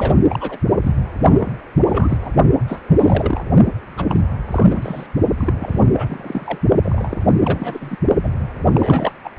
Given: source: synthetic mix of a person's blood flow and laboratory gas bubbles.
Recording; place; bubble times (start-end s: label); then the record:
Doppler ultrasound of blood flow; precordium
0.00-0.15 s: bubbles
0.29-0.57 s: bubbles
0.83-0.93 s: bubbles
1.21-1.52 s: bubbles
1.87-2.32 s: bubbles
2.68-2.81 s: bubbles
2.88-3.43 s: bubbles
3.97-4.06 s: bubbles
4.09-4.20 s: bubbles
4.50-5.06 s: bubbles
5.37-5.53 s: bubbles
5.60-5.88 s: bubbles
5.93-6.59 s: bubbles
6.83-7.21 s: bubbles
7.41-7.97 s: bubbles
8.23-8.29 s: bubbles
8.73-9.14 s: bubbles
9.24-9.30 s: bubbles
From the record:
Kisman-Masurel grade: 342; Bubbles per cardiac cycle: rolling drumbeat, 9 or more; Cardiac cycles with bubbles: 100%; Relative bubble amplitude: moderate (0.250 to 0.450); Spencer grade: 3 (all of the cardiac periods contain showers or single bubble signals, but not dominating or overriding the cardiac motion signals); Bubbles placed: only in the low amplitude regions of the cardiac cycle